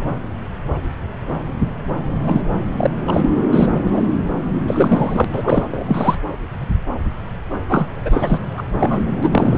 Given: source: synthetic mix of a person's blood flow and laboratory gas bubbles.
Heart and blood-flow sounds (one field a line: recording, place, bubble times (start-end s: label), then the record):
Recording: Doppler ultrasound of blood flow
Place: subclavian vein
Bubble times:
2.24-2.48 s: bubbles
2.77-2.90 s: bubbles
3.07-3.30 s: bubbles
3.52-3.82 s: bubbles
3.92-4.01 s: bubbles
4.67-5.25 s: bubbles
5.32-5.83 s: bubbles
5.88-6.17 s: bubbles
7.68-7.86 s: bubbles
8.05-8.39 s: bubbles
8.57-8.63 s: bubbles
8.80-9.05 s: bubbles
9.23-9.29 s: bubbles
9.32-9.58 s: bubbles
From the record:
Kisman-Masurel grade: 333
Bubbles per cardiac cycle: rolling drumbeat, 9 or more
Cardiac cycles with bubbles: 50 to 99%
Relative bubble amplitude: loud (0.450 to 0.775)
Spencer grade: 3 (all of the cardiac periods contain showers or single bubble signals, but not dominating or overriding the cardiac motion signals)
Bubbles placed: anywhere in the cardiac cycle